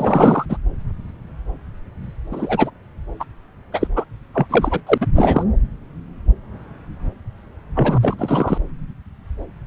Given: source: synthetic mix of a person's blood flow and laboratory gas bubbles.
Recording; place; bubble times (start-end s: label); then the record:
Doppler ultrasound of blood flow; subclavian vein
0.00-0.46 s: bubbles
0.49-0.57 s: bubbles
2.31-2.71 s: bubbles
3.20-3.24 s: bubbles
3.72-3.88 s: bubbles
3.96-4.04 s: bubbles
4.34-4.46 s: bubbles
4.49-4.81 s: bubbles
4.87-4.98 s: bubbles
5.00-5.07 s: bubbles
5.15-5.44 s: bubbles
7.75-8.14 s: bubbles
8.18-8.58 s: bubbles
From the record:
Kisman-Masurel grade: 223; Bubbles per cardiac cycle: several, 3 to 8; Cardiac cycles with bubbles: 10 to 50%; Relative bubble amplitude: loud (0.450 to 0.775); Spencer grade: 2 (many but less than half of the cardiac periods contain bubble signals, singularly or in groups); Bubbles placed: anywhere in the cardiac cycle